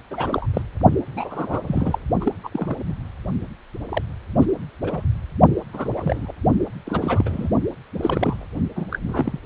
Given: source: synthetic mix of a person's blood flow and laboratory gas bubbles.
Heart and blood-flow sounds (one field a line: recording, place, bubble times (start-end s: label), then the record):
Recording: Doppler ultrasound of blood flow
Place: precordium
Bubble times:
0.10-0.46 s: bubbles
0.54-0.62 s: bubbles
1.16-1.59 s: bubbles
1.67-1.98 s: bubbles
2.21-2.32 s: bubbles
2.44-2.49 s: bubbles
2.52-2.75 s: bubbles
2.88-2.94 s: bubbles
3.89-4.03 s: bubbles
4.40-4.46 s: bubbles
4.84-5.05 s: bubbles
5.73-5.91 s: bubbles
5.96-6.32 s: bubbles
6.86-7.48 s: bubbles
7.97-8.46 s: bubbles
8.76-8.87 s: bubbles
8.91-8.98 s: bubbles
9.08-9.39 s: bubbles
From the record:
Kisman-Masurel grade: 242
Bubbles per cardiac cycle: several, 3 to 8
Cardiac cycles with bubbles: 100%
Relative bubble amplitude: moderate (0.250 to 0.450)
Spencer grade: 3 (all of the cardiac periods contain showers or single bubble signals, but not dominating or overriding the cardiac motion signals)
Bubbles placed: only in the low amplitude regions of the cardiac cycle